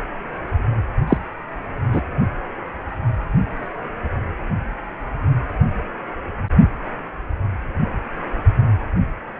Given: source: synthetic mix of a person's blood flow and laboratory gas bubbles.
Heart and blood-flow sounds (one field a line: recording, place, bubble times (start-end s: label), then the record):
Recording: Doppler ultrasound of blood flow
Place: precordium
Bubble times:
1.07-1.18 s: bubbles
1.92-2.02 s: bubbles
From the record:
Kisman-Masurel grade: 113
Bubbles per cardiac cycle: 1 to 2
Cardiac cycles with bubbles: 1 to 10%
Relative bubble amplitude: loud (0.450 to 0.775)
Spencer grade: 1 (occasional bubble signal discernible with the cardiac motion signal, with majority of cardiac periods free of bubbles)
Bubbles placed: anywhere in the cardiac cycle